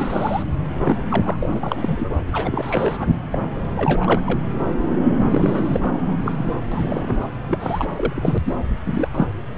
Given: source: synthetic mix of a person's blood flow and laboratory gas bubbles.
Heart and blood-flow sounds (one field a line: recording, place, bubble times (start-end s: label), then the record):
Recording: Doppler ultrasound of blood flow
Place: subclavian vein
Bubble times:
0.00-0.43 s: bubbles
0.84-0.99 s: bubbles
1.09-1.37 s: bubbles
1.40-2.17 s: bubbles
2.32-3.14 s: bubbles
3.31-3.38 s: bubbles
3.76-4.21 s: bubbles
4.26-4.39 s: bubbles
5.28-6.17 s: bubbles
6.21-6.54 s: bubbles
6.71-7.20 s: bubbles
7.48-7.88 s: bubbles
7.96-8.38 s: bubbles
8.45-8.57 s: bubbles
8.86-9.08 s: bubbles
9.11-9.28 s: bubbles
From the record:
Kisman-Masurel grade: 342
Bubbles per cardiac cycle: rolling drumbeat, 9 or more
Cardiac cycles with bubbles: 100%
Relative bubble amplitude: moderate (0.250 to 0.450)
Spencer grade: 3 (all of the cardiac periods contain showers or single bubble signals, but not dominating or overriding the cardiac motion signals)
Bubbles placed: anywhere in the cardiac cycle